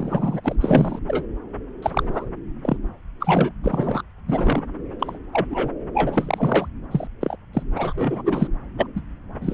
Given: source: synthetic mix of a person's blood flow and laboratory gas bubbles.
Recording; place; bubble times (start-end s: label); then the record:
Doppler ultrasound of blood flow; subclavian vein
0.00-0.55 s: bubbles
0.60-0.99 s: bubbles
1.07-1.27 s: bubbles
1.82-2.27 s: bubbles
2.62-2.77 s: bubbles
3.20-3.52 s: bubbles
3.63-4.02 s: bubbles
4.28-4.62 s: bubbles
4.99-5.18 s: bubbles
5.33-5.46 s: bubbles
5.50-5.73 s: bubbles
5.94-6.68 s: bubbles
6.91-7.08 s: bubbles
7.20-7.37 s: bubbles
7.53-7.63 s: bubbles
7.75-8.22 s: bubbles
8.25-8.47 s: bubbles
8.77-8.86 s: bubbles
8.95-9.01 s: bubbles
9.42-9.54 s: bubbles
From the record:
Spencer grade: 3 (all of the cardiac periods contain showers or single bubble signals, but not dominating or overriding the cardiac motion signals); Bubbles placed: anywhere in the cardiac cycle